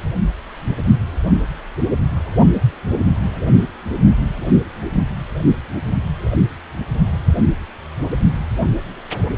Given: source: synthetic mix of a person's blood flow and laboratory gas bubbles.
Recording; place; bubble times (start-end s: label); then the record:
Doppler ultrasound of blood flow; precordium
no bubbles
From the record:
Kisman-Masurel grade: 000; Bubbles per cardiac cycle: 0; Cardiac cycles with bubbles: 0%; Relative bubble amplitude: no bubbles discernible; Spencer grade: 0 (complete lack of bubble signals)